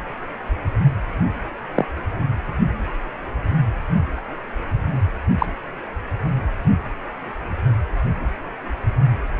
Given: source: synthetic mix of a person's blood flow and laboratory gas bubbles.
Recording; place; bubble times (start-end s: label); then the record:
Doppler ultrasound of blood flow; precordium
1.76-1.85 s: bubbles
5.38-5.46 s: bubbles
From the record:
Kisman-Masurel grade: 123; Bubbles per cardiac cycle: 1 to 2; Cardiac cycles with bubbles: 10 to 50%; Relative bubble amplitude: loud (0.450 to 0.775); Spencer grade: 2 (many but less than half of the cardiac periods contain bubble signals, singularly or in groups); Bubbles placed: anywhere in the cardiac cycle